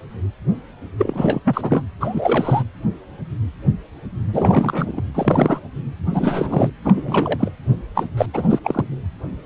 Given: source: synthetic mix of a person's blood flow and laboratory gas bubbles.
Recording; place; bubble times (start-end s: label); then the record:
Doppler ultrasound of blood flow; precordium
0.98-1.40 s: bubbles
1.45-1.83 s: bubbles
1.98-2.63 s: bubbles
4.33-5.01 s: bubbles
5.14-5.60 s: bubbles
6.10-6.70 s: bubbles
6.84-7.52 s: bubbles
7.95-8.05 s: bubbles
8.17-8.26 s: bubbles
8.33-8.59 s: bubbles
8.64-8.84 s: bubbles
From the record:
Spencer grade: 3 (all of the cardiac periods contain showers or single bubble signals, but not dominating or overriding the cardiac motion signals); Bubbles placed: anywhere in the cardiac cycle